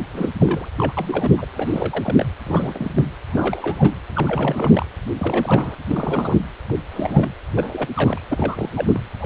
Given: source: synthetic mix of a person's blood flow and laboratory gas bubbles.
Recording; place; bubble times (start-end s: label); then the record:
Doppler ultrasound of blood flow; precordium
0.13-0.29 s: bubbles
0.38-0.70 s: bubbles
0.77-0.94 s: bubbles
0.97-1.34 s: bubbles
1.38-1.46 s: bubbles
1.54-2.25 s: bubbles
2.45-2.92 s: bubbles
2.94-3.02 s: bubbles
3.29-3.95 s: bubbles
4.08-4.86 s: bubbles
5.19-5.75 s: bubbles
5.87-6.36 s: bubbles
6.68-6.75 s: bubbles
6.91-7.30 s: bubbles
7.57-7.87 s: bubbles
7.94-8.22 s: bubbles
8.28-8.69 s: bubbles
8.75-9.00 s: bubbles
9.19-9.26 s: bubbles
From the record:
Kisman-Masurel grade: 342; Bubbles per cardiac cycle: rolling drumbeat, 9 or more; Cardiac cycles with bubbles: 100%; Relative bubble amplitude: moderate (0.250 to 0.450); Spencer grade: 3 (all of the cardiac periods contain showers or single bubble signals, but not dominating or overriding the cardiac motion signals); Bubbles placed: anywhere in the cardiac cycle